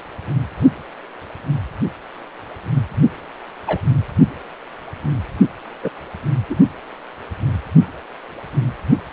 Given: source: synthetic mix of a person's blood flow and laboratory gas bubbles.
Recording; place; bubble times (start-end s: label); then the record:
Doppler ultrasound of blood flow; precordium
3.67-3.79 s: bubbles
5.83-5.90 s: bubbles
6.50-6.55 s: bubbles
From the record:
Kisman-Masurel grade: 122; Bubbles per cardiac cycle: 1 to 2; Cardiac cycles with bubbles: 10 to 50%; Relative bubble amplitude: moderate (0.250 to 0.450); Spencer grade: 2 (many but less than half of the cardiac periods contain bubble signals, singularly or in groups); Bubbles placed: only in the low amplitude regions of the cardiac cycle